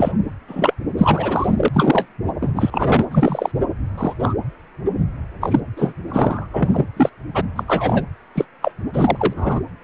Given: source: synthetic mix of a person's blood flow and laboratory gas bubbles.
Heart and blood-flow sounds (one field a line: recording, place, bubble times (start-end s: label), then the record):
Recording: Doppler ultrasound of blood flow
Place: precordium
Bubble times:
0.00-0.12 s: bubbles
0.48-0.74 s: bubbles
0.97-1.47 s: bubbles
1.57-1.69 s: bubbles
1.73-2.08 s: bubbles
2.41-3.06 s: bubbles
3.11-3.52 s: bubbles
3.98-4.14 s: bubbles
4.19-4.33 s: bubbles
5.41-5.61 s: bubbles
5.76-5.93 s: bubbles
6.08-6.48 s: bubbles
6.53-6.85 s: bubbles
6.96-7.09 s: bubbles
7.34-7.41 s: bubbles
7.55-7.63 s: bubbles
7.67-8.04 s: bubbles
8.34-8.45 s: bubbles
8.62-8.72 s: bubbles
8.93-9.33 s: bubbles
9.36-9.60 s: bubbles
From the record:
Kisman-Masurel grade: 233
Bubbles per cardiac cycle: several, 3 to 8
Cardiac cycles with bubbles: 50 to 99%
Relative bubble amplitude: loud (0.450 to 0.775)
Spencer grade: 3 (all of the cardiac periods contain showers or single bubble signals, but not dominating or overriding the cardiac motion signals)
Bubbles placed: anywhere in the cardiac cycle